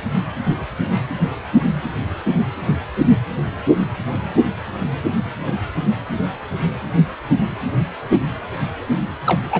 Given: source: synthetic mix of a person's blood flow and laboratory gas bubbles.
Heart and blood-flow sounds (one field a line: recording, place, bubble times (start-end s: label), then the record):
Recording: Doppler ultrasound of blood flow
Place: precordium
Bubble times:
9.25-9.42 s: bubbles
9.50-9.60 s: bubbles
From the record:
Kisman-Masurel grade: 212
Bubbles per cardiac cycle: several, 3 to 8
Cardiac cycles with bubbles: 1 to 10%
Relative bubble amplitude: moderate (0.250 to 0.450)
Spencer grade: 1 (occasional bubble signal discernible with the cardiac motion signal, with majority of cardiac periods free of bubbles)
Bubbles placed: anywhere in the cardiac cycle